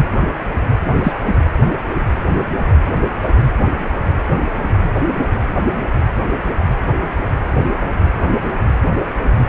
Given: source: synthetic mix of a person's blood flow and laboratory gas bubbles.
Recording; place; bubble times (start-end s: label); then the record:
Doppler ultrasound of blood flow; precordium
0.94-1.14 s: bubbles
1.25-1.32 s: bubbles
From the record:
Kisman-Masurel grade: 213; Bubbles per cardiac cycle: several, 3 to 8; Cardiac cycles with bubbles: 1 to 10%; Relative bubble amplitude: loud (0.450 to 0.775); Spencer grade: 1 (occasional bubble signal discernible with the cardiac motion signal, with majority of cardiac periods free of bubbles); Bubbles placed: anywhere in the cardiac cycle